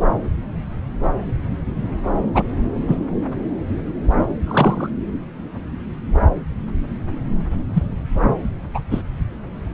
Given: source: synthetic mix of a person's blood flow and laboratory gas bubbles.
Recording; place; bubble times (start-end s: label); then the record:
Doppler ultrasound of blood flow; subclavian vein
2.34-2.43 s: bubbles
2.88-3.00 s: bubbles
4.46-4.90 s: bubbles
7.73-7.83 s: bubbles
8.74-8.80 s: bubbles
8.91-9.02 s: bubbles
From the record:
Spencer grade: 2 (many but less than half of the cardiac periods contain bubble signals, singularly or in groups); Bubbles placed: anywhere in the cardiac cycle